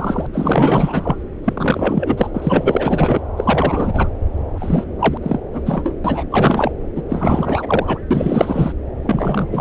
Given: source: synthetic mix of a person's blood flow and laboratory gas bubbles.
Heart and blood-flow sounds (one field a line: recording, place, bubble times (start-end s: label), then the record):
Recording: Doppler ultrasound of blood flow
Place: subclavian vein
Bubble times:
0.00-0.27 s: bubbles
0.32-1.16 s: bubbles
1.44-2.30 s: bubbles
2.34-3.22 s: bubbles
3.36-4.08 s: bubbles
4.58-4.84 s: bubbles
4.99-5.17 s: bubbles
5.22-5.42 s: bubbles
5.52-5.61 s: bubbles
5.65-5.96 s: bubbles
6.04-6.26 s: bubbles
6.31-6.72 s: bubbles
6.96-7.02 s: bubbles
7.08-7.99 s: bubbles
8.11-8.73 s: bubbles
9.03-9.47 s: bubbles
9.51-9.61 s: bubbles
From the record:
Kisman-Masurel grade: 444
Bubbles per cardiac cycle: continuous sound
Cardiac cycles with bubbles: 100%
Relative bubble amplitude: maximal (0.775 to 0.999)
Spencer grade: 4 (maximum detectable bubble signal sounding continuously throughout systole and diastole of every cardiac period, and overriding the amplitude of the normal cardiac signals)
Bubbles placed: anywhere in the cardiac cycle